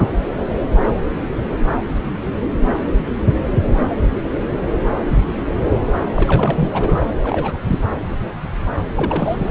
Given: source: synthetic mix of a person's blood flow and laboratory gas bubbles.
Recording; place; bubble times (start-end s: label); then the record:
Doppler ultrasound of blood flow; subclavian vein
6.13-7.05 s: bubbles
7.22-7.58 s: bubbles
7.67-7.79 s: bubbles
8.96-9.49 s: bubbles
From the record:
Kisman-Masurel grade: 222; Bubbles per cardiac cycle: several, 3 to 8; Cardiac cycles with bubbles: 10 to 50%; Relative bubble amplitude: moderate (0.250 to 0.450); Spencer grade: 2 (many but less than half of the cardiac periods contain bubble signals, singularly or in groups); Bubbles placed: anywhere in the cardiac cycle